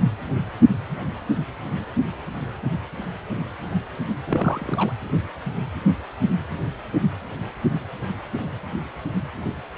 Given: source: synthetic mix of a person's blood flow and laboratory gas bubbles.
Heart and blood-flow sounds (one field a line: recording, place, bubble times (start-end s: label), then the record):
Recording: Doppler ultrasound of blood flow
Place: precordium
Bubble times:
4.26-4.92 s: bubbles
From the record:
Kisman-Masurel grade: 212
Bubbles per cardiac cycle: several, 3 to 8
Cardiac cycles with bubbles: 1 to 10%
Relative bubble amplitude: moderate (0.250 to 0.450)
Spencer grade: 1 (occasional bubble signal discernible with the cardiac motion signal, with majority of cardiac periods free of bubbles)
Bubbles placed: anywhere in the cardiac cycle